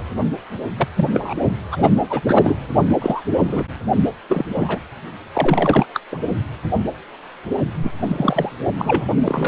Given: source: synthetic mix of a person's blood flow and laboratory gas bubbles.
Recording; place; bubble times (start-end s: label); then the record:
Doppler ultrasound of blood flow; precordium
0.00-0.03 s: bubbles
0.77-0.88 s: bubbles
0.95-1.08 s: bubbles
1.14-1.33 s: bubbles
1.71-1.91 s: bubbles
2.09-2.21 s: bubbles
2.26-2.58 s: bubbles
2.89-2.95 s: bubbles
3.00-3.22 s: bubbles
3.47-3.63 s: bubbles
4.29-4.46 s: bubbles
4.54-4.79 s: bubbles
5.33-5.85 s: bubbles
5.94-6.00 s: bubbles
6.12-6.19 s: bubbles
7.83-7.91 s: bubbles
8.07-8.51 s: bubbles
8.78-9.06 s: bubbles
9.23-9.48 s: bubbles
From the record:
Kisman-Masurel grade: 233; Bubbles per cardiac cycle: several, 3 to 8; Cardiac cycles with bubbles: 50 to 99%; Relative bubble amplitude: loud (0.450 to 0.775); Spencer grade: 3 (all of the cardiac periods contain showers or single bubble signals, but not dominating or overriding the cardiac motion signals); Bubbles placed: only in the low amplitude regions of the cardiac cycle